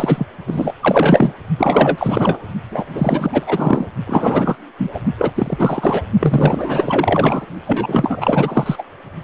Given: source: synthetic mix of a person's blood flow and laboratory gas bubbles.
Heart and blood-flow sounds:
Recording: Doppler ultrasound of blood flow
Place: precordium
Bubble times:
0.00-0.26 s: bubbles
0.46-0.73 s: bubbles
0.81-1.35 s: bubbles
1.57-2.38 s: bubbles
2.71-2.86 s: bubbles
2.94-3.88 s: bubbles
4.07-4.55 s: bubbles
4.78-4.90 s: bubbles
4.93-5.00 s: bubbles
5.17-5.31 s: bubbles
5.34-6.03 s: bubbles
6.19-7.46 s: bubbles
7.67-8.83 s: bubbles
From the record:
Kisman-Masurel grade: 444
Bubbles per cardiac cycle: continuous sound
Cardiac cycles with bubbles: 100%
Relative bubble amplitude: maximal (0.775 to 0.999)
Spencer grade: 4 (maximum detectable bubble signal sounding continuously throughout systole and diastole of every cardiac period, and overriding the amplitude of the normal cardiac signals)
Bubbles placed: only in the low amplitude regions of the cardiac cycle

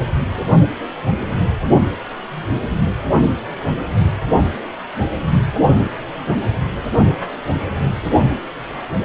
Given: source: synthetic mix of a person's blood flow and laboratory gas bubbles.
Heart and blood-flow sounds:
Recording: Doppler ultrasound of blood flow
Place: precordium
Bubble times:
8.98-9.05 s: bubbles
From the record:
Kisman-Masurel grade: 211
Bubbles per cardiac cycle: several, 3 to 8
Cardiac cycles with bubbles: 1 to 10%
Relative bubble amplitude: barely perceptible (0.100 to 0.250)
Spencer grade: 1 (occasional bubble signal discernible with the cardiac motion signal, with majority of cardiac periods free of bubbles)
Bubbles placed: anywhere in the cardiac cycle

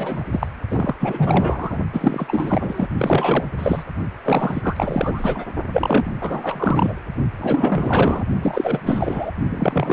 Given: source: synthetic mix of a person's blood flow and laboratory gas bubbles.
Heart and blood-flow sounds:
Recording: Doppler ultrasound of blood flow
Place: precordium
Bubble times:
0.00-0.24 s: bubbles
0.31-0.47 s: bubbles
0.70-0.95 s: bubbles
0.99-1.77 s: bubbles
1.93-2.88 s: bubbles
2.98-3.45 s: bubbles
3.59-3.83 s: bubbles
4.24-5.45 s: bubbles
5.71-6.11 s: bubbles
6.21-6.94 s: bubbles
7.38-8.24 s: bubbles
8.42-8.80 s: bubbles
8.86-9.31 s: bubbles
9.50-9.93 s: bubbles
From the record:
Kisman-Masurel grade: 444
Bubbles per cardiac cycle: continuous sound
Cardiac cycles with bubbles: 100%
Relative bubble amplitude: maximal (0.775 to 0.999)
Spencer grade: 4 (maximum detectable bubble signal sounding continuously throughout systole and diastole of every cardiac period, and overriding the amplitude of the normal cardiac signals)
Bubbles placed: only in the low amplitude regions of the cardiac cycle

